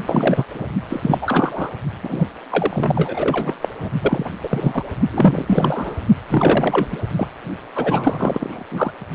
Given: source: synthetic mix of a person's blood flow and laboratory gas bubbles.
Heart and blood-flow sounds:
Doppler ultrasound of blood flow; precordium
0.07-0.45 s: bubbles
0.54-0.65 s: bubbles
0.90-1.18 s: bubbles
1.21-1.71 s: bubbles
2.03-2.27 s: bubbles
2.50-3.55 s: bubbles
3.61-3.68 s: bubbles
3.79-3.89 s: bubbles
4.00-4.30 s: bubbles
4.42-4.83 s: bubbles
5.10-5.95 s: bubbles
6.29-6.88 s: bubbles
6.92-6.97 s: bubbles
7.17-7.29 s: bubbles
7.75-8.63 s: bubbles
8.71-8.91 s: bubbles
From the record:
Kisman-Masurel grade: 343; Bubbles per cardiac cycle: rolling drumbeat, 9 or more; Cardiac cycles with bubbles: 100%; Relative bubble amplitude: loud (0.450 to 0.775); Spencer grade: 3 (all of the cardiac periods contain showers or single bubble signals, but not dominating or overriding the cardiac motion signals); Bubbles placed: only in the low amplitude regions of the cardiac cycle

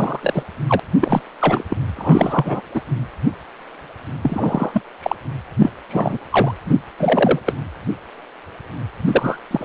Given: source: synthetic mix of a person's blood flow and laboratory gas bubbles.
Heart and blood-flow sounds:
Doppler ultrasound of blood flow; precordium
0.00-0.43 s: bubbles
0.67-0.80 s: bubbles
1.00-1.21 s: bubbles
1.39-1.64 s: bubbles
1.70-1.77 s: bubbles
1.96-2.61 s: bubbles
2.74-2.81 s: bubbles
4.22-4.82 s: bubbles
5.03-5.16 s: bubbles
5.57-5.71 s: bubbles
5.89-6.18 s: bubbles
6.30-6.53 s: bubbles
6.66-6.75 s: bubbles
6.98-7.39 s: bubbles
7.46-7.54 s: bubbles
9.05-9.38 s: bubbles
9.51-9.65 s: bubbles
From the record:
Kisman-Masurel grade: 233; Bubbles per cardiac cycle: several, 3 to 8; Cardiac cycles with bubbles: 50 to 99%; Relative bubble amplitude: loud (0.450 to 0.775); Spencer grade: 3 (all of the cardiac periods contain showers or single bubble signals, but not dominating or overriding the cardiac motion signals); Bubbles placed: anywhere in the cardiac cycle

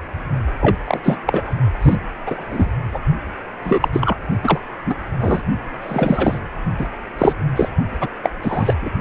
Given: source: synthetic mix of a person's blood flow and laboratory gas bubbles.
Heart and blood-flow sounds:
Doppler ultrasound of blood flow; precordium
0.60-0.76 s: bubbles
0.87-1.00 s: bubbles
1.03-1.16 s: bubbles
1.26-1.56 s: bubbles
1.82-1.96 s: bubbles
2.26-2.44 s: bubbles
2.48-2.69 s: bubbles
2.92-2.99 s: bubbles
3.64-3.89 s: bubbles
3.93-4.16 s: bubbles
4.43-4.59 s: bubbles
4.86-4.95 s: bubbles
5.20-5.41 s: bubbles
5.81-6.40 s: bubbles
6.78-6.87 s: bubbles
7.19-7.33 s: bubbles
7.55-7.68 s: bubbles
8.00-8.09 s: bubbles
8.23-8.29 s: bubbles
8.42-8.73 s: bubbles
8.81-8.90 s: bubbles
From the record:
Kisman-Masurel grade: 233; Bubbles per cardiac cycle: several, 3 to 8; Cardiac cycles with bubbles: 50 to 99%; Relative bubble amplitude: loud (0.450 to 0.775); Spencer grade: 3 (all of the cardiac periods contain showers or single bubble signals, but not dominating or overriding the cardiac motion signals); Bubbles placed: only in the low amplitude regions of the cardiac cycle

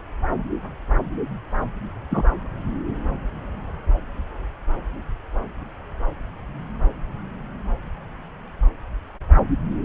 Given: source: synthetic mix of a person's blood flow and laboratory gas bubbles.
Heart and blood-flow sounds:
Doppler ultrasound of blood flow; subclavian vein
2.10-2.23 s: bubbles
From the record:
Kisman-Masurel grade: 113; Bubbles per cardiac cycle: 1 to 2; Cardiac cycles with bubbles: 1 to 10%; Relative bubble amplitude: loud (0.450 to 0.775); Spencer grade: 1 (occasional bubble signal discernible with the cardiac motion signal, with majority of cardiac periods free of bubbles); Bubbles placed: anywhere in the cardiac cycle

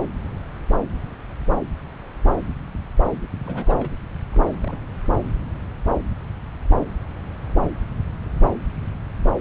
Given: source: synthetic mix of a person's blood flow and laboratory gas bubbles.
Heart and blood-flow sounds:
Doppler ultrasound of blood flow; subclavian vein
3.44-3.91 s: bubbles
4.32-4.44 s: bubbles
4.62-4.78 s: bubbles
5.08-5.17 s: bubbles
From the record:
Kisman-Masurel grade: 221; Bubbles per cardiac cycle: several, 3 to 8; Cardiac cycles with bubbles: 10 to 50%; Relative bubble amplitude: barely perceptible (0.100 to 0.250); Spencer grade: 2 (many but less than half of the cardiac periods contain bubble signals, singularly or in groups); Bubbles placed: anywhere in the cardiac cycle

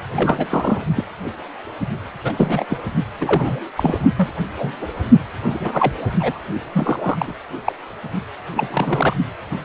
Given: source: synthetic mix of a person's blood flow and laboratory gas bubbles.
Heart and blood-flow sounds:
Doppler ultrasound of blood flow; precordium
0.14-0.83 s: bubbles
0.95-1.04 s: bubbles
2.23-2.34 s: bubbles
2.37-2.65 s: bubbles
2.69-2.77 s: bubbles
3.21-3.60 s: bubbles
3.75-3.98 s: bubbles
4.17-4.29 s: bubbles
4.58-4.74 s: bubbles
4.81-4.87 s: bubbles
5.50-5.92 s: bubbles
6.19-6.38 s: bubbles
6.72-7.36 s: bubbles
7.65-7.72 s: bubbles
8.55-9.16 s: bubbles
9.50-9.57 s: bubbles
From the record:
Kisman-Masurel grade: 242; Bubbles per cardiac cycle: several, 3 to 8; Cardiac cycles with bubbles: 100%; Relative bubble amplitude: moderate (0.250 to 0.450); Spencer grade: 3 (all of the cardiac periods contain showers or single bubble signals, but not dominating or overriding the cardiac motion signals); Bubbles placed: only in the low amplitude regions of the cardiac cycle

